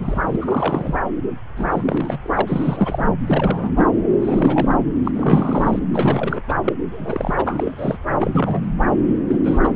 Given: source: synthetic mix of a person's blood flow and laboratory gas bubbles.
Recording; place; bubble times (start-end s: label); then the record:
Doppler ultrasound of blood flow; subclavian vein
0.00-0.98 s: bubbles
1.56-2.19 s: bubbles
2.22-2.42 s: bubbles
2.47-3.03 s: bubbles
3.26-3.71 s: bubbles
3.77-3.85 s: bubbles
4.21-4.76 s: bubbles
5.04-5.11 s: bubbles
5.14-5.79 s: bubbles
5.93-6.41 s: bubbles
6.48-6.53 s: bubbles
6.64-6.74 s: bubbles
6.92-7.43 s: bubbles
7.46-7.97 s: bubbles
8.19-8.69 s: bubbles
9.28-9.71 s: bubbles
From the record:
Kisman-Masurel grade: 342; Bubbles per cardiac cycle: rolling drumbeat, 9 or more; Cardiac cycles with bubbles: 100%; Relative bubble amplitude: moderate (0.250 to 0.450); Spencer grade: 3 (all of the cardiac periods contain showers or single bubble signals, but not dominating or overriding the cardiac motion signals); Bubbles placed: anywhere in the cardiac cycle